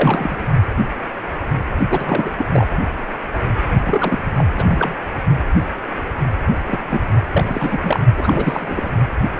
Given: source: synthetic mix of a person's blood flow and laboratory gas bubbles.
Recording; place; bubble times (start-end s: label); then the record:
Doppler ultrasound of blood flow; precordium
0.00-0.47 s: bubbles
1.90-2.31 s: bubbles
2.38-2.45 s: bubbles
2.52-2.67 s: bubbles
3.83-4.33 s: bubbles
4.38-4.44 s: bubbles
4.54-4.64 s: bubbles
4.69-4.95 s: bubbles
6.66-6.79 s: bubbles
6.90-7.00 s: bubbles
7.33-8.00 s: bubbles
8.17-8.91 s: bubbles
From the record:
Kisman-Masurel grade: 332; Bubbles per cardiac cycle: rolling drumbeat, 9 or more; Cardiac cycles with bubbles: 50 to 99%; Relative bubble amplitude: moderate (0.250 to 0.450); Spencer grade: 3 (all of the cardiac periods contain showers or single bubble signals, but not dominating or overriding the cardiac motion signals); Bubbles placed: only in the low amplitude regions of the cardiac cycle